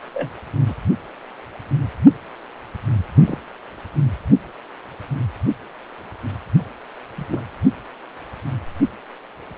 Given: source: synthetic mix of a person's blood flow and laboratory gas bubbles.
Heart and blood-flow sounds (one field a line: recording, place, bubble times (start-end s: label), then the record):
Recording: Doppler ultrasound of blood flow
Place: precordium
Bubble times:
0.14-0.31 s: bubbles
0.67-0.76 s: bubbles
3.17-3.39 s: bubbles
7.17-7.41 s: bubbles
From the record:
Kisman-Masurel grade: 121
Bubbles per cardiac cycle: 1 to 2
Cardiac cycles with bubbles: 10 to 50%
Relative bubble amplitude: barely perceptible (0.100 to 0.250)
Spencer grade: 2 (many but less than half of the cardiac periods contain bubble signals, singularly or in groups)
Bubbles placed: only in the low amplitude regions of the cardiac cycle